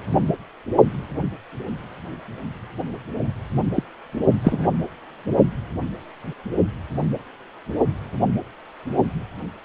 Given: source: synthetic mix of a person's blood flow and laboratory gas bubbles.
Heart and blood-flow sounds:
Doppler ultrasound of blood flow; precordium
3.76-3.83 s: bubbles
4.44-4.67 s: bubbles
From the record:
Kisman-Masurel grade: 213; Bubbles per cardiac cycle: several, 3 to 8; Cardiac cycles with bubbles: 1 to 10%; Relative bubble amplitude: loud (0.450 to 0.775); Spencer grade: 1 (occasional bubble signal discernible with the cardiac motion signal, with majority of cardiac periods free of bubbles); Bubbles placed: only in the low amplitude regions of the cardiac cycle

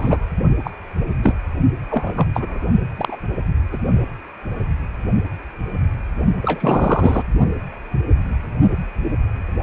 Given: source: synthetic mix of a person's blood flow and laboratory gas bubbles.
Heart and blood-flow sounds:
Doppler ultrasound of blood flow; precordium
0.00-0.27 s: bubbles
0.64-0.71 s: bubbles
1.23-1.35 s: bubbles
1.91-2.27 s: bubbles
2.34-2.58 s: bubbles
2.96-3.17 s: bubbles
3.71-3.77 s: bubbles
6.42-7.22 s: bubbles
From the record:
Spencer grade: 3 (all of the cardiac periods contain showers or single bubble signals, but not dominating or overriding the cardiac motion signals); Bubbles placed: only in the low amplitude regions of the cardiac cycle

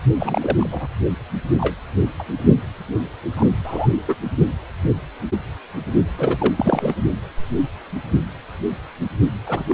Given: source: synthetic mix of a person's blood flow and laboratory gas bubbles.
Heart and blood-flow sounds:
Doppler ultrasound of blood flow; precordium
0.19-0.88 s: bubbles
1.58-1.75 s: bubbles
2.19-2.24 s: bubbles
3.36-3.50 s: bubbles
3.64-3.89 s: bubbles
4.08-4.15 s: bubbles
6.18-6.54 s: bubbles
6.57-6.93 s: bubbles
9.46-9.63 s: bubbles
9.69-9.74 s: bubbles
From the record:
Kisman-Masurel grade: 222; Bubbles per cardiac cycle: several, 3 to 8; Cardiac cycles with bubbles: 10 to 50%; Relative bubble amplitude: moderate (0.250 to 0.450); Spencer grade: 2 (many but less than half of the cardiac periods contain bubble signals, singularly or in groups); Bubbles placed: only in the low amplitude regions of the cardiac cycle

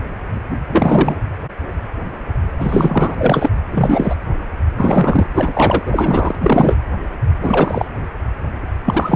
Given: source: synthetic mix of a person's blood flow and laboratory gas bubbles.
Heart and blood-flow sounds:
Doppler ultrasound of blood flow; precordium
0.71-1.15 s: bubbles
2.59-3.15 s: bubbles
3.18-3.50 s: bubbles
3.67-4.16 s: bubbles
4.76-5.27 s: bubbles
5.35-5.82 s: bubbles
5.86-6.35 s: bubbles
6.42-6.75 s: bubbles
7.42-7.88 s: bubbles
8.85-9.16 s: bubbles
From the record:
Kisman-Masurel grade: 333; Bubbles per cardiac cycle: rolling drumbeat, 9 or more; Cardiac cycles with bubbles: 50 to 99%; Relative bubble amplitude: loud (0.450 to 0.775); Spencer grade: 3 (all of the cardiac periods contain showers or single bubble signals, but not dominating or overriding the cardiac motion signals); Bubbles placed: anywhere in the cardiac cycle

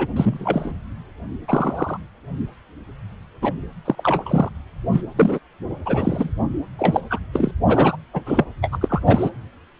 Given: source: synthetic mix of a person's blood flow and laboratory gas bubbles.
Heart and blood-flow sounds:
Doppler ultrasound of blood flow; precordium
0.00-0.07 s: bubbles
0.16-0.72 s: bubbles
1.48-1.98 s: bubbles
3.42-3.54 s: bubbles
3.84-4.50 s: bubbles
4.92-5.02 s: bubbles
5.17-5.39 s: bubbles
5.86-6.34 s: bubbles
6.79-7.01 s: bubbles
7.10-7.19 s: bubbles
7.33-7.52 s: bubbles
7.68-7.97 s: bubbles
8.13-8.21 s: bubbles
8.25-8.45 s: bubbles
8.62-8.78 s: bubbles
8.81-9.01 s: bubbles
9.06-9.30 s: bubbles
From the record:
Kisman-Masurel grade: 232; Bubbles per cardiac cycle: several, 3 to 8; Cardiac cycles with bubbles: 50 to 99%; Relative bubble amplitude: moderate (0.250 to 0.450); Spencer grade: 3 (all of the cardiac periods contain showers or single bubble signals, but not dominating or overriding the cardiac motion signals); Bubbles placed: anywhere in the cardiac cycle

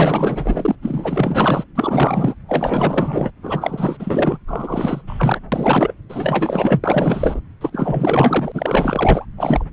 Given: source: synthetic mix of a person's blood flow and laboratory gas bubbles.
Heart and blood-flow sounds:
Doppler ultrasound of blood flow; subclavian vein
0.00-0.75 s: bubbles
0.81-1.64 s: bubbles
1.75-2.34 s: bubbles
2.48-3.31 s: bubbles
3.42-4.38 s: bubbles
4.47-5.04 s: bubbles
5.07-5.39 s: bubbles
5.52-5.95 s: bubbles
6.09-6.81 s: bubbles
6.83-7.40 s: bubbles
7.61-9.25 s: bubbles
9.37-9.65 s: bubbles
From the record:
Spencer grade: 4 (maximum detectable bubble signal sounding continuously throughout systole and diastole of every cardiac period, and overriding the amplitude of the normal cardiac signals); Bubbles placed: anywhere in the cardiac cycle

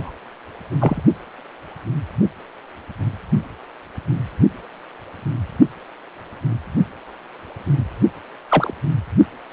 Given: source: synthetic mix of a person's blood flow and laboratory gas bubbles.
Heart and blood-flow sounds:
Doppler ultrasound of blood flow; precordium
0.00-0.11 s: bubbles
0.80-1.01 s: bubbles
8.49-8.74 s: bubbles
From the record:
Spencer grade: 2 (many but less than half of the cardiac periods contain bubble signals, singularly or in groups); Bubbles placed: only in the low amplitude regions of the cardiac cycle

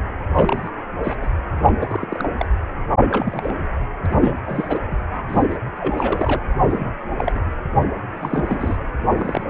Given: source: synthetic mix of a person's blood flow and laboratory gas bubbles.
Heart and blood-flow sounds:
Doppler ultrasound of blood flow; precordium
0.32-0.71 s: bubbles
1.03-1.15 s: bubbles
1.21-1.29 s: bubbles
1.55-2.29 s: bubbles
2.38-2.46 s: bubbles
3.08-3.55 s: bubbles
4.05-4.40 s: bubbles
4.46-4.79 s: bubbles
4.91-4.96 s: bubbles
5.28-5.42 s: bubbles
5.50-5.58 s: bubbles
5.79-6.42 s: bubbles
6.57-6.89 s: bubbles
7.17-7.32 s: bubbles
7.35-7.40 s: bubbles
8.21-8.84 s: bubbles
9.18-9.44 s: bubbles
From the record:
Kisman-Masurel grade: 242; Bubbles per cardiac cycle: several, 3 to 8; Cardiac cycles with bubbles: 100%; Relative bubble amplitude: moderate (0.250 to 0.450); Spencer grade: 3 (all of the cardiac periods contain showers or single bubble signals, but not dominating or overriding the cardiac motion signals); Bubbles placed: anywhere in the cardiac cycle

